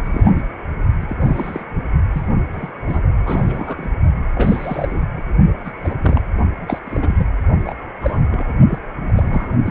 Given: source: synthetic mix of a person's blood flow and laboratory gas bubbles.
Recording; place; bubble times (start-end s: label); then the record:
Doppler ultrasound of blood flow; precordium
0.05-0.42 s: bubbles
1.00-1.16 s: bubbles
1.21-1.64 s: bubbles
2.12-2.27 s: bubbles
2.52-2.71 s: bubbles
2.86-3.00 s: bubbles
3.17-3.88 s: bubbles
4.35-5.01 s: bubbles
5.15-5.34 s: bubbles
5.65-5.72 s: bubbles
5.79-6.22 s: bubbles
6.68-6.79 s: bubbles
6.84-7.27 s: bubbles
7.65-7.74 s: bubbles
8.01-8.25 s: bubbles
8.30-8.58 s: bubbles
8.68-8.79 s: bubbles
9.08-9.59 s: bubbles
9.65-9.70 s: bubbles
From the record:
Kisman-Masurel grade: 242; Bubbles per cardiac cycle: several, 3 to 8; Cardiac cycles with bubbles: 100%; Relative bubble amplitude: moderate (0.250 to 0.450); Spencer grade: 3 (all of the cardiac periods contain showers or single bubble signals, but not dominating or overriding the cardiac motion signals); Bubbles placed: only in the low amplitude regions of the cardiac cycle